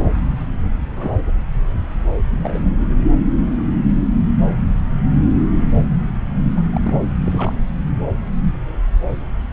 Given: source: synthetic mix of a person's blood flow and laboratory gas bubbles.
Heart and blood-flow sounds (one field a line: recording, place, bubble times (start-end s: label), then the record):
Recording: Doppler ultrasound of blood flow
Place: subclavian vein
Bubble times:
0.91-1.20 s: bubbles
2.30-2.71 s: bubbles
6.57-6.61 s: bubbles
6.73-6.81 s: bubbles
6.85-7.07 s: bubbles
7.25-7.54 s: bubbles
From the record:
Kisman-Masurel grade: 221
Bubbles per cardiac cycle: several, 3 to 8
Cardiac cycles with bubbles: 10 to 50%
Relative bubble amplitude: barely perceptible (0.100 to 0.250)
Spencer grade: 2 (many but less than half of the cardiac periods contain bubble signals, singularly or in groups)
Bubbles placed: anywhere in the cardiac cycle